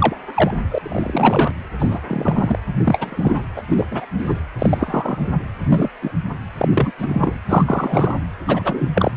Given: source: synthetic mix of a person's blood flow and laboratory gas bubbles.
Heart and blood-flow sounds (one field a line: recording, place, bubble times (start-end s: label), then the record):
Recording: Doppler ultrasound of blood flow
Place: precordium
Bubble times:
0.00-0.15 s: bubbles
0.35-0.51 s: bubbles
0.70-0.78 s: bubbles
0.82-1.52 s: bubbles
1.78-1.99 s: bubbles
2.06-2.59 s: bubbles
2.77-3.45 s: bubbles
3.56-3.62 s: bubbles
3.69-3.86 s: bubbles
3.91-4.05 s: bubbles
4.18-4.34 s: bubbles
4.58-5.28 s: bubbles
5.69-5.89 s: bubbles
6.01-6.12 s: bubbles
6.58-6.92 s: bubbles
6.98-7.31 s: bubbles
7.49-8.14 s: bubbles
8.47-8.89 s: bubbles
8.94-9.12 s: bubbles
From the record:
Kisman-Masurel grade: 243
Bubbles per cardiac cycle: several, 3 to 8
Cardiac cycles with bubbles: 100%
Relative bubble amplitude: loud (0.450 to 0.775)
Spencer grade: 3 (all of the cardiac periods contain showers or single bubble signals, but not dominating or overriding the cardiac motion signals)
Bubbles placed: anywhere in the cardiac cycle